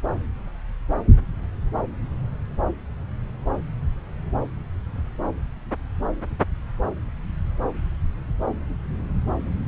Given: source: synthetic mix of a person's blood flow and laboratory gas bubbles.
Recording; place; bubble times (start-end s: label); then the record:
Doppler ultrasound of blood flow; subclavian vein
no bubbles
From the record:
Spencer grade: 0 (complete lack of bubble signals)